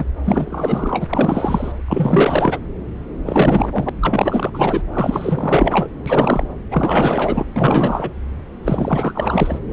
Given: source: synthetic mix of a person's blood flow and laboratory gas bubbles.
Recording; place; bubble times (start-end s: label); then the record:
Doppler ultrasound of blood flow; subclavian vein
0.00-0.05 s: bubbles
0.25-1.04 s: bubbles
1.09-1.72 s: bubbles
1.88-2.59 s: bubbles
3.25-3.90 s: bubbles
4.01-4.51 s: bubbles
4.54-4.82 s: bubbles
4.94-5.88 s: bubbles
6.06-6.46 s: bubbles
6.71-7.46 s: bubbles
7.56-8.10 s: bubbles
8.64-9.60 s: bubbles
From the record:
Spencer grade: 4 (maximum detectable bubble signal sounding continuously throughout systole and diastole of every cardiac period, and overriding the amplitude of the normal cardiac signals); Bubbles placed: anywhere in the cardiac cycle